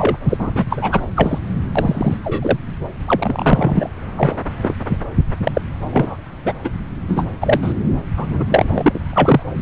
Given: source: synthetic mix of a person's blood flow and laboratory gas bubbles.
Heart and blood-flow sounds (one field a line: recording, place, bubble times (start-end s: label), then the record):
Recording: Doppler ultrasound of blood flow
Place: subclavian vein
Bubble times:
0.00-0.17 s: bubbles
0.29-0.52 s: bubbles
0.54-0.65 s: bubbles
0.70-1.01 s: bubbles
1.16-1.39 s: bubbles
1.76-2.17 s: bubbles
2.24-2.58 s: bubbles
3.07-3.89 s: bubbles
4.16-4.35 s: bubbles
4.62-4.77 s: bubbles
4.89-4.98 s: bubbles
5.43-5.62 s: bubbles
5.92-6.16 s: bubbles
6.45-6.53 s: bubbles
6.64-6.70 s: bubbles
7.08-7.26 s: bubbles
7.41-7.59 s: bubbles
7.62-7.74 s: bubbles
8.17-8.44 s: bubbles
8.48-8.99 s: bubbles
9.10-9.43 s: bubbles
9.54-9.61 s: bubbles
From the record:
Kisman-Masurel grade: 243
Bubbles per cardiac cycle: several, 3 to 8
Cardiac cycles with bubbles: 100%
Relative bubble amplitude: loud (0.450 to 0.775)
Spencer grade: 3 (all of the cardiac periods contain showers or single bubble signals, but not dominating or overriding the cardiac motion signals)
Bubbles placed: anywhere in the cardiac cycle